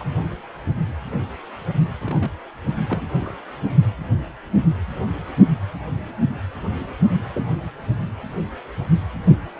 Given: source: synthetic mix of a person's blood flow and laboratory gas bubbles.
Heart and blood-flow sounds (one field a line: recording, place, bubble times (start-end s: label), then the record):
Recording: Doppler ultrasound of blood flow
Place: precordium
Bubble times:
0.00-0.04 s: bubbles
1.99-2.31 s: bubbles
2.90-3.09 s: bubbles
3.17-3.33 s: bubbles
7.12-7.25 s: bubbles
7.33-7.47 s: bubbles
From the record:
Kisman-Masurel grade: 121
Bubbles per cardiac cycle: 1 to 2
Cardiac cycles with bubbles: 10 to 50%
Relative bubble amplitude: barely perceptible (0.100 to 0.250)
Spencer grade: 2 (many but less than half of the cardiac periods contain bubble signals, singularly or in groups)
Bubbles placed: only in the low amplitude regions of the cardiac cycle